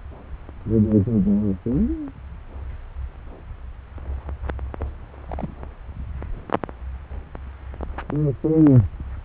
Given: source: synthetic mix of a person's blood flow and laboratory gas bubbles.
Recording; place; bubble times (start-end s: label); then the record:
Doppler ultrasound of blood flow; subclavian vein
4.79-4.83 s: bubbles
5.29-5.54 s: bubbles
From the record:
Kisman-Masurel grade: 111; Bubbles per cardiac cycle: 1 to 2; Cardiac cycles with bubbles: 1 to 10%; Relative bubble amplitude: barely perceptible (0.100 to 0.250); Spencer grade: 1 (occasional bubble signal discernible with the cardiac motion signal, with majority of cardiac periods free of bubbles); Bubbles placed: anywhere in the cardiac cycle